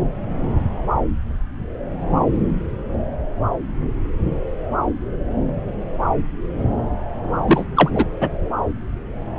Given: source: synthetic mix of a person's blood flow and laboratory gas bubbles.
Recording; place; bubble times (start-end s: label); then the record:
Doppler ultrasound of blood flow; subclavian vein
7.47-7.65 s: bubbles
7.76-7.91 s: bubbles
7.95-8.06 s: bubbles
8.20-8.28 s: bubbles
From the record:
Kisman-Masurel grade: 213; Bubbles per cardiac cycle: several, 3 to 8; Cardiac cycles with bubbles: 1 to 10%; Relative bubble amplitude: loud (0.450 to 0.775); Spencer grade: 1 (occasional bubble signal discernible with the cardiac motion signal, with majority of cardiac periods free of bubbles); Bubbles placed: anywhere in the cardiac cycle